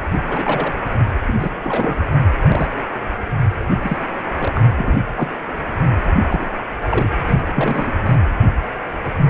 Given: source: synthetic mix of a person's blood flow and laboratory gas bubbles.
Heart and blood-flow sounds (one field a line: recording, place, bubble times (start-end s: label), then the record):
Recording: Doppler ultrasound of blood flow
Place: precordium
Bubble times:
0.27-0.73 s: bubbles
1.00-1.04 s: bubbles
1.27-1.34 s: bubbles
1.39-1.51 s: bubbles
1.63-2.08 s: bubbles
2.48-2.69 s: bubbles
3.81-3.97 s: bubbles
4.40-4.61 s: bubbles
4.75-4.97 s: bubbles
5.17-5.29 s: bubbles
6.29-6.50 s: bubbles
6.89-7.11 s: bubbles
7.27-7.35 s: bubbles
7.54-7.92 s: bubbles
8.04-8.15 s: bubbles
From the record:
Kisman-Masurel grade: 232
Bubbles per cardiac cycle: several, 3 to 8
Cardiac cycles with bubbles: 50 to 99%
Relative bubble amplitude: moderate (0.250 to 0.450)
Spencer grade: 3 (all of the cardiac periods contain showers or single bubble signals, but not dominating or overriding the cardiac motion signals)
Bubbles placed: anywhere in the cardiac cycle